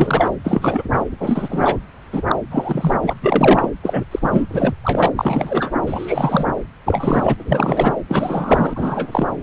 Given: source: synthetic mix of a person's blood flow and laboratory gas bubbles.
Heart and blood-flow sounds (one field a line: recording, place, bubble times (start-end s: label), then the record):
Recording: Doppler ultrasound of blood flow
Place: subclavian vein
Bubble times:
0.00-0.32 s: bubbles
0.44-0.83 s: bubbles
0.92-1.03 s: bubbles
1.19-1.77 s: bubbles
2.12-2.23 s: bubbles
2.28-2.35 s: bubbles
2.51-2.95 s: bubbles
3.02-3.15 s: bubbles
3.20-3.69 s: bubbles
3.83-4.01 s: bubbles
4.11-4.19 s: bubbles
4.21-4.46 s: bubbles
4.49-4.73 s: bubbles
4.83-5.10 s: bubbles
5.16-5.71 s: bubbles
5.86-6.46 s: bubbles
6.85-7.34 s: bubbles
7.37-7.96 s: bubbles
8.08-9.27 s: bubbles
From the record:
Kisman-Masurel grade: 343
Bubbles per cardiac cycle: rolling drumbeat, 9 or more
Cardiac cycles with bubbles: 100%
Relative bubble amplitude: loud (0.450 to 0.775)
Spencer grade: 3 (all of the cardiac periods contain showers or single bubble signals, but not dominating or overriding the cardiac motion signals)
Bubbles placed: anywhere in the cardiac cycle